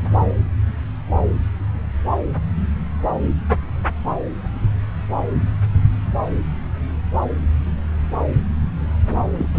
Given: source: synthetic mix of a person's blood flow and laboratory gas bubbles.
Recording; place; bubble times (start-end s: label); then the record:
Doppler ultrasound of blood flow; subclavian vein
9.38-9.48 s: bubbles
9.54-9.59 s: bubbles
From the record:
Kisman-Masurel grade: 212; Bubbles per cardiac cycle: several, 3 to 8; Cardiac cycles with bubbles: 1 to 10%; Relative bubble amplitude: moderate (0.250 to 0.450); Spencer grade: 1 (occasional bubble signal discernible with the cardiac motion signal, with majority of cardiac periods free of bubbles); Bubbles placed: anywhere in the cardiac cycle